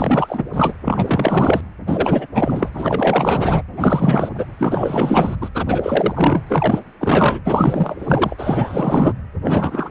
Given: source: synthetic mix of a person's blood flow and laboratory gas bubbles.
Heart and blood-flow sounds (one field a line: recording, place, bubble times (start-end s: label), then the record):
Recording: Doppler ultrasound of blood flow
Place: precordium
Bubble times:
0.00-0.43 s: bubbles
0.53-0.73 s: bubbles
0.84-1.61 s: bubbles
1.86-2.27 s: bubbles
2.34-3.63 s: bubbles
3.72-4.29 s: bubbles
4.37-4.46 s: bubbles
4.58-5.35 s: bubbles
5.41-5.50 s: bubbles
5.54-6.42 s: bubbles
6.46-6.83 s: bubbles
7.00-7.41 s: bubbles
7.45-9.13 s: bubbles
9.44-9.90 s: bubbles
From the record:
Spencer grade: 4 (maximum detectable bubble signal sounding continuously throughout systole and diastole of every cardiac period, and overriding the amplitude of the normal cardiac signals)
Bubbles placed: anywhere in the cardiac cycle